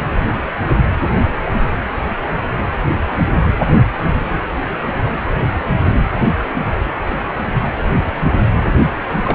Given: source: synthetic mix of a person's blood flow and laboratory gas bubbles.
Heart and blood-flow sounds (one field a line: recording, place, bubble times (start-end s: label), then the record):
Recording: Doppler ultrasound of blood flow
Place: precordium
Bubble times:
9.24-9.35 s: bubbles
From the record:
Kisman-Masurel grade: 212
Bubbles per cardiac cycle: several, 3 to 8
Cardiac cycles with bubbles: 1 to 10%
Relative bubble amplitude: moderate (0.250 to 0.450)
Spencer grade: 1 (occasional bubble signal discernible with the cardiac motion signal, with majority of cardiac periods free of bubbles)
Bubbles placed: anywhere in the cardiac cycle